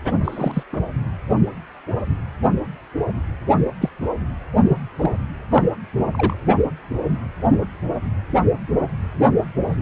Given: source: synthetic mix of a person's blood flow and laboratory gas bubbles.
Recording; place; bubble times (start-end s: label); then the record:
Doppler ultrasound of blood flow; precordium
0.24-0.64 s: bubbles
0.72-0.81 s: bubbles
3.81-3.89 s: bubbles
4.69-4.77 s: bubbles
4.98-5.11 s: bubbles
5.50-5.64 s: bubbles
5.97-6.06 s: bubbles
6.12-6.37 s: bubbles
From the record:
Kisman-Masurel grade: 222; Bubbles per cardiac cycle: several, 3 to 8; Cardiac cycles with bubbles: 10 to 50%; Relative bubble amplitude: moderate (0.250 to 0.450); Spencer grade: 2 (many but less than half of the cardiac periods contain bubble signals, singularly or in groups); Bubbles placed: anywhere in the cardiac cycle